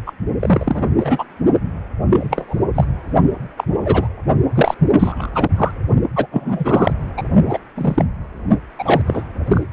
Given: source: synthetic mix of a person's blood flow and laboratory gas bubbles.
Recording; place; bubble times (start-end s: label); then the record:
Doppler ultrasound of blood flow; precordium
0.06-0.13 s: bubbles
0.40-0.89 s: bubbles
1.00-1.24 s: bubbles
2.10-2.60 s: bubbles
2.75-2.85 s: bubbles
3.56-3.64 s: bubbles
3.84-4.08 s: bubbles
4.29-4.35 s: bubbles
4.55-4.75 s: bubbles
4.88-5.31 s: bubbles
5.34-5.50 s: bubbles
5.57-5.71 s: bubbles
6.15-6.26 s: bubbles
6.32-6.93 s: bubbles
7.17-7.22 s: bubbles
7.45-7.58 s: bubbles
7.75-8.05 s: bubbles
8.78-9.01 s: bubbles
9.06-9.22 s: bubbles
9.45-9.67 s: bubbles
From the record:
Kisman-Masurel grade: 243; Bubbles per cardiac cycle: several, 3 to 8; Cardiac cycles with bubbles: 100%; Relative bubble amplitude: loud (0.450 to 0.775); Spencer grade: 3 (all of the cardiac periods contain showers or single bubble signals, but not dominating or overriding the cardiac motion signals); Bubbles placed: only in the low amplitude regions of the cardiac cycle